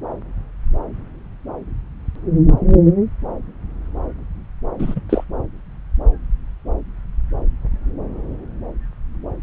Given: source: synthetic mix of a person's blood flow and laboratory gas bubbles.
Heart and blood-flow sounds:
Doppler ultrasound of blood flow; subclavian vein
4.79-5.01 s: bubbles
5.09-5.24 s: bubbles
From the record:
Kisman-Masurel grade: 213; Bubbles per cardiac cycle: several, 3 to 8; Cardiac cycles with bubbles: 1 to 10%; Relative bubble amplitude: loud (0.450 to 0.775); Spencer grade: 1 (occasional bubble signal discernible with the cardiac motion signal, with majority of cardiac periods free of bubbles); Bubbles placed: anywhere in the cardiac cycle

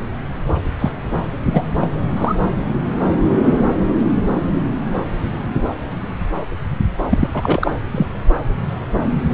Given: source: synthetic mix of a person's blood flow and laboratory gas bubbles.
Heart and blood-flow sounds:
Doppler ultrasound of blood flow; subclavian vein
0.79-0.92 s: bubbles
1.52-1.64 s: bubbles
1.81-1.88 s: bubbles
2.16-2.35 s: bubbles
7.09-7.71 s: bubbles
7.91-8.06 s: bubbles
From the record:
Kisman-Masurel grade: 223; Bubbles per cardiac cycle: several, 3 to 8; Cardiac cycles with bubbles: 10 to 50%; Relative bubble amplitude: loud (0.450 to 0.775); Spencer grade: 2 (many but less than half of the cardiac periods contain bubble signals, singularly or in groups); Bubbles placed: anywhere in the cardiac cycle

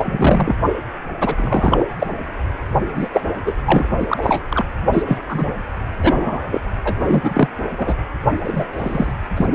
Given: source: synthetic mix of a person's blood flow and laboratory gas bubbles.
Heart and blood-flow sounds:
Doppler ultrasound of blood flow; precordium
0.00-0.56 s: bubbles
1.21-1.84 s: bubbles
1.99-2.07 s: bubbles
2.95-3.08 s: bubbles
3.12-3.21 s: bubbles
3.46-3.53 s: bubbles
3.65-3.89 s: bubbles
3.99-4.42 s: bubbles
4.49-4.65 s: bubbles
4.92-5.17 s: bubbles
5.28-5.48 s: bubbles
6.02-6.40 s: bubbles
6.51-6.61 s: bubbles
6.84-6.93 s: bubbles
7.00-7.48 s: bubbles
7.77-7.94 s: bubbles
8.44-8.66 s: bubbles
8.72-9.13 s: bubbles
9.37-9.46 s: bubbles
From the record:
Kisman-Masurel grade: 243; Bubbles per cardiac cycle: several, 3 to 8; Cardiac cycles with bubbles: 100%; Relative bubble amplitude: loud (0.450 to 0.775); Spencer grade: 3 (all of the cardiac periods contain showers or single bubble signals, but not dominating or overriding the cardiac motion signals); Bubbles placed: anywhere in the cardiac cycle

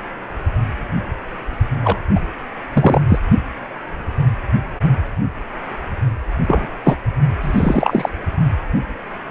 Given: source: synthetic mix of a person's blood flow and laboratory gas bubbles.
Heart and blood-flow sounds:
Doppler ultrasound of blood flow; precordium
1.83-1.98 s: bubbles
2.15-2.19 s: bubbles
2.73-3.03 s: bubbles
3.09-3.19 s: bubbles
6.47-6.66 s: bubbles
6.84-6.96 s: bubbles
7.41-8.09 s: bubbles
From the record:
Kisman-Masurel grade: 223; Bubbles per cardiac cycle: several, 3 to 8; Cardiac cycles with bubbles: 10 to 50%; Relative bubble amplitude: loud (0.450 to 0.775); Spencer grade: 2 (many but less than half of the cardiac periods contain bubble signals, singularly or in groups); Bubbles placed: only in the low amplitude regions of the cardiac cycle

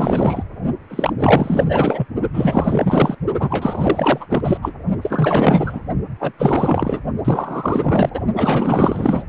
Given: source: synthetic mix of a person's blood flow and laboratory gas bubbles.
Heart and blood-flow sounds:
Doppler ultrasound of blood flow; precordium
0.00-0.43 s: bubbles
0.90-1.13 s: bubbles
1.18-1.65 s: bubbles
1.68-2.06 s: bubbles
2.33-3.15 s: bubbles
3.39-4.58 s: bubbles
4.62-4.73 s: bubbles
5.02-5.80 s: bubbles
6.19-6.32 s: bubbles
6.38-7.00 s: bubbles
7.25-8.10 s: bubbles
8.14-8.21 s: bubbles
8.36-9.23 s: bubbles
From the record:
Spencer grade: 4 (maximum detectable bubble signal sounding continuously throughout systole and diastole of every cardiac period, and overriding the amplitude of the normal cardiac signals); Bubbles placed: only in the low amplitude regions of the cardiac cycle

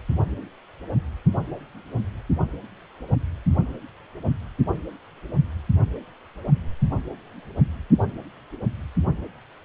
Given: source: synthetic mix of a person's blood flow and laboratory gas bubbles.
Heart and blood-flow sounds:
Doppler ultrasound of blood flow; precordium
no bubbles
From the record:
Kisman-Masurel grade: 000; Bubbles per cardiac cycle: 0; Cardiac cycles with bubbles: 0%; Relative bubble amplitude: no bubbles discernible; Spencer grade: 0 (complete lack of bubble signals)

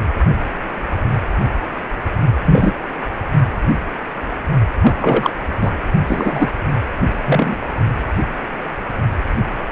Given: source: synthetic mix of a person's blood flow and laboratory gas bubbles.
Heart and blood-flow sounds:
Doppler ultrasound of blood flow; precordium
2.44-2.73 s: bubbles
4.82-5.31 s: bubbles
5.60-5.71 s: bubbles
6.06-6.48 s: bubbles
7.25-7.57 s: bubbles
From the record:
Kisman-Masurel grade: 223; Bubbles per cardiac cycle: several, 3 to 8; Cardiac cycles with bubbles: 10 to 50%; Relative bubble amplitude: loud (0.450 to 0.775); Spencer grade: 2 (many but less than half of the cardiac periods contain bubble signals, singularly or in groups); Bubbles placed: only in the low amplitude regions of the cardiac cycle

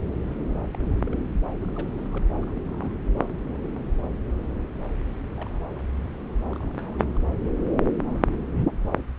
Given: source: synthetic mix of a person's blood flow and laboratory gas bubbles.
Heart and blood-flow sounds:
Doppler ultrasound of blood flow; subclavian vein
0.28-0.36 s: bubbles
0.49-0.64 s: bubbles
0.72-0.88 s: bubbles
0.90-1.00 s: bubbles
1.04-1.18 s: bubbles
1.57-2.07 s: bubbles
2.10-2.24 s: bubbles
2.41-2.60 s: bubbles
2.66-2.94 s: bubbles
3.16-3.31 s: bubbles
3.46-3.51 s: bubbles
3.54-3.58 s: bubbles
3.67-3.82 s: bubbles
5.37-5.65 s: bubbles
5.70-5.88 s: bubbles
6.45-7.11 s: bubbles
7.15-7.19 s: bubbles
7.56-7.85 s: bubbles
7.98-8.42 s: bubbles
8.52-8.65 s: bubbles
From the record:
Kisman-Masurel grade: 221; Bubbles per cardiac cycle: several, 3 to 8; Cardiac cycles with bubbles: 10 to 50%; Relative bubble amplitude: barely perceptible (0.100 to 0.250); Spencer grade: 2 (many but less than half of the cardiac periods contain bubble signals, singularly or in groups); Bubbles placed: anywhere in the cardiac cycle

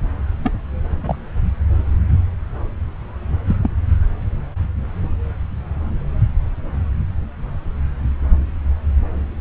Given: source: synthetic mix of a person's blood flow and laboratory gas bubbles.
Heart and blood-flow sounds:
Doppler ultrasound of blood flow; subclavian vein
0.44-0.52 s: bubbles
1.03-1.15 s: bubbles
3.46-3.56 s: bubbles
3.61-3.71 s: bubbles
From the record:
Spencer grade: 1 (occasional bubble signal discernible with the cardiac motion signal, with majority of cardiac periods free of bubbles); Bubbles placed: anywhere in the cardiac cycle

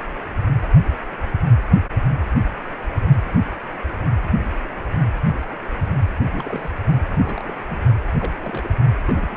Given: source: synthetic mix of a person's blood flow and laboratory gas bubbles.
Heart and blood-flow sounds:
Doppler ultrasound of blood flow; precordium
6.33-6.71 s: bubbles
7.08-7.55 s: bubbles
7.70-7.83 s: bubbles
8.20-8.33 s: bubbles
8.43-8.68 s: bubbles
9.07-9.37 s: bubbles
From the record:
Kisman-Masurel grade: 221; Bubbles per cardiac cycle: several, 3 to 8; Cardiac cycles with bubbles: 10 to 50%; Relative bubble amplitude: barely perceptible (0.100 to 0.250); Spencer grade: 2 (many but less than half of the cardiac periods contain bubble signals, singularly or in groups); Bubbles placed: only in the low amplitude regions of the cardiac cycle

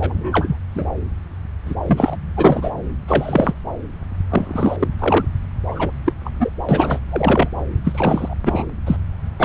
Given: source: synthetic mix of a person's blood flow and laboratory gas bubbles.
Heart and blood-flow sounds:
Doppler ultrasound of blood flow; subclavian vein
0.00-0.56 s: bubbles
0.74-0.86 s: bubbles
1.66-1.75 s: bubbles
1.86-2.17 s: bubbles
2.36-2.70 s: bubbles
3.07-3.54 s: bubbles
4.29-4.77 s: bubbles
4.80-4.88 s: bubbles
4.99-5.26 s: bubbles
5.68-5.92 s: bubbles
6.05-6.13 s: bubbles
6.25-6.30 s: bubbles
6.40-6.49 s: bubbles
6.69-6.99 s: bubbles
7.10-7.49 s: bubbles
7.84-8.35 s: bubbles
8.45-8.65 s: bubbles
8.87-8.96 s: bubbles
9.37-9.45 s: bubbles
From the record:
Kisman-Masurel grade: 233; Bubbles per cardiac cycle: several, 3 to 8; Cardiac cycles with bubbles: 50 to 99%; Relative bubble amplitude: loud (0.450 to 0.775); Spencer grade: 3 (all of the cardiac periods contain showers or single bubble signals, but not dominating or overriding the cardiac motion signals); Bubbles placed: anywhere in the cardiac cycle

